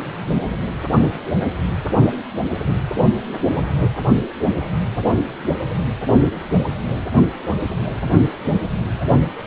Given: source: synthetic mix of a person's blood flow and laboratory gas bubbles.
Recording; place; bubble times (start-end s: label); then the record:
Doppler ultrasound of blood flow; precordium
no bubbles
From the record:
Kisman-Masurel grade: 000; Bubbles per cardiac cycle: 0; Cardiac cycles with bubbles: 0%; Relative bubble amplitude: no bubbles discernible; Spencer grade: 0 (complete lack of bubble signals)